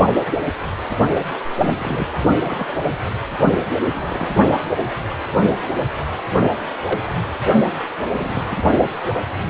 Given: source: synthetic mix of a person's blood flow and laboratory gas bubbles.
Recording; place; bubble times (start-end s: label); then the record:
Doppler ultrasound of blood flow; precordium
1.57-2.07 s: bubbles
2.41-2.71 s: bubbles
2.83-2.90 s: bubbles
3.91-4.33 s: bubbles
6.84-7.12 s: bubbles
8.16-8.56 s: bubbles
From the record:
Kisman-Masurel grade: 121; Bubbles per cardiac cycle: 1 to 2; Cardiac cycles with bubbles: 10 to 50%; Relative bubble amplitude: barely perceptible (0.100 to 0.250); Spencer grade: 2 (many but less than half of the cardiac periods contain bubble signals, singularly or in groups); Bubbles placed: only in the low amplitude regions of the cardiac cycle